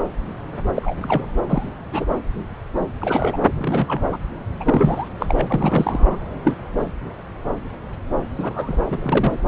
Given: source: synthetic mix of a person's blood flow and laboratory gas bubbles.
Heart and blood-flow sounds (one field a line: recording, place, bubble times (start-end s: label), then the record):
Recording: Doppler ultrasound of blood flow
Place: subclavian vein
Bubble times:
0.74-1.25 s: bubbles
1.49-1.69 s: bubbles
1.92-2.06 s: bubbles
3.01-3.38 s: bubbles
3.56-4.01 s: bubbles
4.12-4.17 s: bubbles
4.59-5.08 s: bubbles
5.19-6.19 s: bubbles
6.44-6.54 s: bubbles
8.37-9.33 s: bubbles
From the record:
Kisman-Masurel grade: 232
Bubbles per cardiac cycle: several, 3 to 8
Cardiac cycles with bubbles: 50 to 99%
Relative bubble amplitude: moderate (0.250 to 0.450)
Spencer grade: 3 (all of the cardiac periods contain showers or single bubble signals, but not dominating or overriding the cardiac motion signals)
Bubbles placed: anywhere in the cardiac cycle